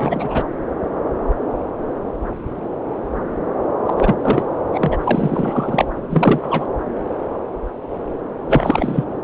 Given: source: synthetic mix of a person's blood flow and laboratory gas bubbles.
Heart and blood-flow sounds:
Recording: Doppler ultrasound of blood flow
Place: subclavian vein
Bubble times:
0.00-0.43 s: bubbles
3.86-3.94 s: bubbles
3.98-4.17 s: bubbles
4.20-4.46 s: bubbles
4.73-4.98 s: bubbles
5.04-5.85 s: bubbles
6.10-6.67 s: bubbles
8.46-9.04 s: bubbles
From the record:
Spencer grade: 3 (all of the cardiac periods contain showers or single bubble signals, but not dominating or overriding the cardiac motion signals)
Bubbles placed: anywhere in the cardiac cycle

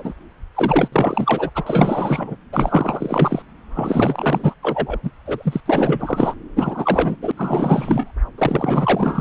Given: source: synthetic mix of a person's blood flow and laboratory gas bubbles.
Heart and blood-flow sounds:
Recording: Doppler ultrasound of blood flow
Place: subclavian vein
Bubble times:
0.00-0.14 s: bubbles
0.55-0.88 s: bubbles
0.92-1.50 s: bubbles
1.54-1.63 s: bubbles
1.66-2.36 s: bubbles
2.52-3.42 s: bubbles
3.73-4.54 s: bubbles
4.62-4.99 s: bubbles
5.03-5.11 s: bubbles
5.26-5.61 s: bubbles
5.66-6.34 s: bubbles
6.56-7.17 s: bubbles
7.22-7.32 s: bubbles
7.37-8.12 s: bubbles
8.38-9.21 s: bubbles
From the record:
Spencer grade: 4 (maximum detectable bubble signal sounding continuously throughout systole and diastole of every cardiac period, and overriding the amplitude of the normal cardiac signals)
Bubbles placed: anywhere in the cardiac cycle

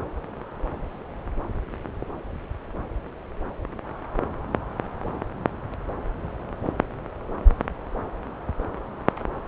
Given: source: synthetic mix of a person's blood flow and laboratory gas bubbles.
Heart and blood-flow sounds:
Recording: Doppler ultrasound of blood flow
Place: subclavian vein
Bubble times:
no bubbles
From the record:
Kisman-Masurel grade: 000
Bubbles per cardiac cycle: 0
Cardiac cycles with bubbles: 0%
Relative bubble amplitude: no bubbles discernible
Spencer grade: 0 (complete lack of bubble signals)

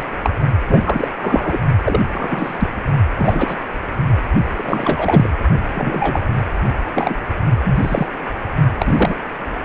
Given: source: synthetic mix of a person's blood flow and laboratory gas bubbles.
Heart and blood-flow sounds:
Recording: Doppler ultrasound of blood flow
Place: precordium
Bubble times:
0.00-0.03 s: bubbles
0.22-0.30 s: bubbles
0.67-1.08 s: bubbles
1.21-1.59 s: bubbles
1.83-2.02 s: bubbles
2.08-2.69 s: bubbles
3.17-3.56 s: bubbles
4.56-5.28 s: bubbles
5.74-6.23 s: bubbles
6.95-7.19 s: bubbles
7.64-8.07 s: bubbles
8.80-9.14 s: bubbles
From the record:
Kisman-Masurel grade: 243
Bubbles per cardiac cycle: several, 3 to 8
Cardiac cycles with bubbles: 100%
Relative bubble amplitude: loud (0.450 to 0.775)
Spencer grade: 3 (all of the cardiac periods contain showers or single bubble signals, but not dominating or overriding the cardiac motion signals)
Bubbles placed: only in the low amplitude regions of the cardiac cycle

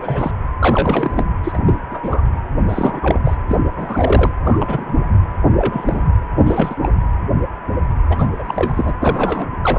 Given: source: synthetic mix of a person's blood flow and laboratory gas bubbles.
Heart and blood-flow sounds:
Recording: Doppler ultrasound of blood flow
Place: precordium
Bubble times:
0.00-0.31 s: bubbles
0.59-1.24 s: bubbles
1.44-1.57 s: bubbles
1.65-1.79 s: bubbles
1.91-2.00 s: bubbles
2.03-2.21 s: bubbles
2.69-3.20 s: bubbles
3.25-3.35 s: bubbles
3.49-3.56 s: bubbles
3.76-4.32 s: bubbles
4.44-4.92 s: bubbles
5.58-6.07 s: bubbles
6.39-6.76 s: bubbles
6.83-6.90 s: bubbles
8.09-8.26 s: bubbles
8.38-8.95 s: bubbles
9.00-9.47 s: bubbles
9.62-9.78 s: bubbles
From the record:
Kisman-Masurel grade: 232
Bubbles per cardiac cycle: several, 3 to 8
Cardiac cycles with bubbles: 50 to 99%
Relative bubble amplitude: moderate (0.250 to 0.450)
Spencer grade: 3 (all of the cardiac periods contain showers or single bubble signals, but not dominating or overriding the cardiac motion signals)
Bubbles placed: anywhere in the cardiac cycle

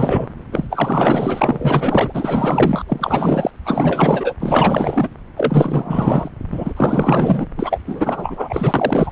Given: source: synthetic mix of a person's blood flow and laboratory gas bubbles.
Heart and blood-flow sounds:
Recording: Doppler ultrasound of blood flow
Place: subclavian vein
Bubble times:
0.00-0.27 s: bubbles
0.51-2.83 s: bubbles
2.86-3.50 s: bubbles
3.64-4.34 s: bubbles
4.40-5.08 s: bubbles
5.37-6.29 s: bubbles
6.51-6.73 s: bubbles
6.76-7.46 s: bubbles
7.57-7.81 s: bubbles
7.86-9.12 s: bubbles
From the record:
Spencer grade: 4 (maximum detectable bubble signal sounding continuously throughout systole and diastole of every cardiac period, and overriding the amplitude of the normal cardiac signals)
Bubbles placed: anywhere in the cardiac cycle

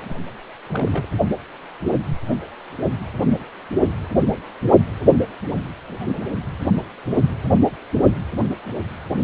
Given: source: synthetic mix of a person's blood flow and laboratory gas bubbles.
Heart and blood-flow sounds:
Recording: Doppler ultrasound of blood flow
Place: precordium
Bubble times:
0.02-0.15 s: bubbles
0.66-1.08 s: bubbles
From the record:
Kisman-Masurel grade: 111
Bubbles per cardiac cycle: 1 to 2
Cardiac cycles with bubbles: 1 to 10%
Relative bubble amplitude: barely perceptible (0.100 to 0.250)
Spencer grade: 1 (occasional bubble signal discernible with the cardiac motion signal, with majority of cardiac periods free of bubbles)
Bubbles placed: anywhere in the cardiac cycle

